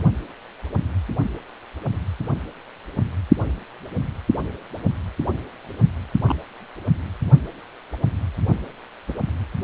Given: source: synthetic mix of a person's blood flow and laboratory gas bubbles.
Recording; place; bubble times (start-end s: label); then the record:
Doppler ultrasound of blood flow; precordium
6.23-6.36 s: bubbles
9.08-9.13 s: bubbles
From the record:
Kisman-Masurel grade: 122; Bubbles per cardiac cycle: 1 to 2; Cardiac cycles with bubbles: 10 to 50%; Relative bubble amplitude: moderate (0.250 to 0.450); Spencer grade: 2 (many but less than half of the cardiac periods contain bubble signals, singularly or in groups); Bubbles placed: only in the low amplitude regions of the cardiac cycle